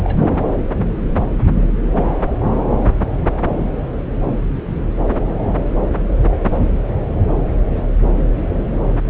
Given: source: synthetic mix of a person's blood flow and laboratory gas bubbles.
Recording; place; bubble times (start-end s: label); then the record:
Doppler ultrasound of blood flow; subclavian vein
0.00-0.20 s: bubbles
From the record:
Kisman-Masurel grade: 111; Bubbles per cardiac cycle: 1 to 2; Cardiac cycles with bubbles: 1 to 10%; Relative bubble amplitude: barely perceptible (0.100 to 0.250); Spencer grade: 1 (occasional bubble signal discernible with the cardiac motion signal, with majority of cardiac periods free of bubbles); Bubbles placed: anywhere in the cardiac cycle